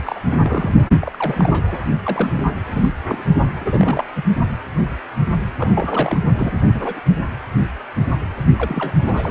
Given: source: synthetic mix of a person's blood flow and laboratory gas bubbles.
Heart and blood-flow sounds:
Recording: Doppler ultrasound of blood flow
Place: precordium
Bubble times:
0.03-0.20 s: bubbles
0.30-0.88 s: bubbles
0.99-1.78 s: bubbles
2.05-2.32 s: bubbles
2.35-2.50 s: bubbles
2.66-2.92 s: bubbles
3.07-3.24 s: bubbles
3.60-4.06 s: bubbles
4.16-4.23 s: bubbles
5.58-6.19 s: bubbles
6.38-6.70 s: bubbles
6.74-7.00 s: bubbles
8.55-8.94 s: bubbles
9.06-9.31 s: bubbles
From the record:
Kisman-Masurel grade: 332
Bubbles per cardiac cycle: rolling drumbeat, 9 or more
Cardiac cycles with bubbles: 50 to 99%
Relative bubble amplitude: moderate (0.250 to 0.450)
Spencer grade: 3 (all of the cardiac periods contain showers or single bubble signals, but not dominating or overriding the cardiac motion signals)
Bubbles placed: only in the low amplitude regions of the cardiac cycle

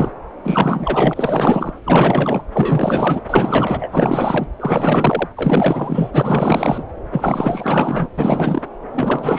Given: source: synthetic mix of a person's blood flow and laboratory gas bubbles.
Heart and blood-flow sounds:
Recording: Doppler ultrasound of blood flow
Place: subclavian vein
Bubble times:
0.00-0.12 s: bubbles
0.43-1.73 s: bubbles
1.84-2.42 s: bubbles
2.52-3.21 s: bubbles
3.29-3.88 s: bubbles
3.92-4.46 s: bubbles
4.59-5.28 s: bubbles
5.36-6.12 s: bubbles
6.14-6.83 s: bubbles
7.12-8.07 s: bubbles
8.18-8.62 s: bubbles
8.93-9.39 s: bubbles
From the record:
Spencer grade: 4 (maximum detectable bubble signal sounding continuously throughout systole and diastole of every cardiac period, and overriding the amplitude of the normal cardiac signals)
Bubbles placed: anywhere in the cardiac cycle

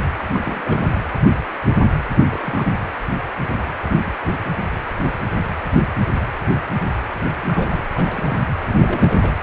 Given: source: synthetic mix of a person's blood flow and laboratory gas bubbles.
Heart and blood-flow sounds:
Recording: Doppler ultrasound of blood flow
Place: precordium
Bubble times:
0.18-0.24 s: bubbles
0.33-0.42 s: bubbles
0.45-0.98 s: bubbles
2.31-2.73 s: bubbles
7.48-7.86 s: bubbles
7.94-8.38 s: bubbles
8.67-9.34 s: bubbles
From the record:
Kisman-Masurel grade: 221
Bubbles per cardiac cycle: several, 3 to 8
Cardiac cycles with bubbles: 10 to 50%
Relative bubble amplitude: barely perceptible (0.100 to 0.250)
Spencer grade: 2 (many but less than half of the cardiac periods contain bubble signals, singularly or in groups)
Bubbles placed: anywhere in the cardiac cycle

